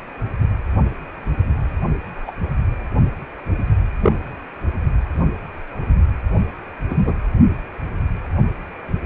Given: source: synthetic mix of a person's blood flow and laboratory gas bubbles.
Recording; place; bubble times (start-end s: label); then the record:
Doppler ultrasound of blood flow; precordium
2.27-2.31 s: bubbles
4.02-4.12 s: bubbles
6.90-6.96 s: bubbles
7.05-7.14 s: bubbles
From the record:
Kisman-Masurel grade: 122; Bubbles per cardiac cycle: 1 to 2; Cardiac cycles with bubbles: 10 to 50%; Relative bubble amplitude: moderate (0.250 to 0.450); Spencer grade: 2 (many but less than half of the cardiac periods contain bubble signals, singularly or in groups); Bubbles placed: anywhere in the cardiac cycle